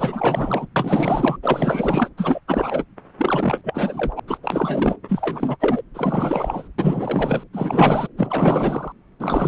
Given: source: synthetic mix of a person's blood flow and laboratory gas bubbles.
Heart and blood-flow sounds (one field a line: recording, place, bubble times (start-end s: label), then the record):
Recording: Doppler ultrasound of blood flow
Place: subclavian vein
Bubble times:
0.00-0.66 s: bubbles
0.76-1.36 s: bubbles
1.42-2.10 s: bubbles
2.17-2.41 s: bubbles
2.47-2.84 s: bubbles
3.18-4.20 s: bubbles
4.27-4.38 s: bubbles
4.42-4.96 s: bubbles
5.08-5.57 s: bubbles
5.59-5.82 s: bubbles
5.94-6.69 s: bubbles
6.78-7.44 s: bubbles
7.53-8.07 s: bubbles
8.17-8.93 s: bubbles
9.20-9.48 s: bubbles
From the record:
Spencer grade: 4 (maximum detectable bubble signal sounding continuously throughout systole and diastole of every cardiac period, and overriding the amplitude of the normal cardiac signals)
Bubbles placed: anywhere in the cardiac cycle